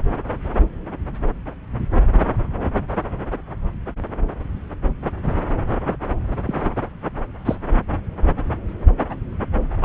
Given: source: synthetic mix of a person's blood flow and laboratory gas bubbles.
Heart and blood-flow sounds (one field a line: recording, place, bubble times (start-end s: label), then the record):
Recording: Doppler ultrasound of blood flow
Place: subclavian vein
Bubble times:
6.46-6.70 s: bubbles
7.45-7.56 s: bubbles
9.81-9.85 s: bubbles
From the record:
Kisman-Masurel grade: 122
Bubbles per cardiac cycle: 1 to 2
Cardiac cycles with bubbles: 10 to 50%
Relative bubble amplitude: moderate (0.250 to 0.450)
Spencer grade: 2 (many but less than half of the cardiac periods contain bubble signals, singularly or in groups)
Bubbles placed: anywhere in the cardiac cycle